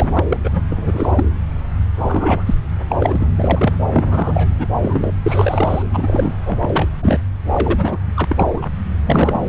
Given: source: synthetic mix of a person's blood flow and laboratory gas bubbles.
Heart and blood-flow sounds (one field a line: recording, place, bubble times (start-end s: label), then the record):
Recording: Doppler ultrasound of blood flow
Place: subclavian vein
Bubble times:
0.00-0.10 s: bubbles
0.16-0.24 s: bubbles
0.29-0.37 s: bubbles
0.43-0.50 s: bubbles
0.53-0.63 s: bubbles
0.69-1.25 s: bubbles
1.95-2.55 s: bubbles
2.89-2.96 s: bubbles
3.00-3.26 s: bubbles
3.37-3.77 s: bubbles
3.94-4.50 s: bubbles
4.58-4.67 s: bubbles
4.75-5.14 s: bubbles
5.22-5.82 s: bubbles
5.93-6.36 s: bubbles
6.45-6.88 s: bubbles
7.02-7.20 s: bubbles
7.54-7.98 s: bubbles
8.14-8.25 s: bubbles
8.28-8.66 s: bubbles
9.06-9.40 s: bubbles
From the record:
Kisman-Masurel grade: 243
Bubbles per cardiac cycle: several, 3 to 8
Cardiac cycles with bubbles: 100%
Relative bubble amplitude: loud (0.450 to 0.775)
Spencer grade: 3 (all of the cardiac periods contain showers or single bubble signals, but not dominating or overriding the cardiac motion signals)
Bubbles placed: anywhere in the cardiac cycle